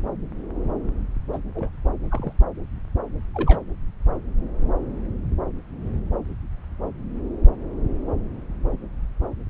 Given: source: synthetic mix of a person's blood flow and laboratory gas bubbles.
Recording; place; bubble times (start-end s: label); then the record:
Doppler ultrasound of blood flow; subclavian vein
1.33-1.38 s: bubbles
1.54-1.70 s: bubbles
2.11-2.33 s: bubbles
3.34-3.59 s: bubbles
From the record:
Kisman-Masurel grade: 121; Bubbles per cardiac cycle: 1 to 2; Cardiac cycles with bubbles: 10 to 50%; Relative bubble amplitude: barely perceptible (0.100 to 0.250); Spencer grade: 2 (many but less than half of the cardiac periods contain bubble signals, singularly or in groups); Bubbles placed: anywhere in the cardiac cycle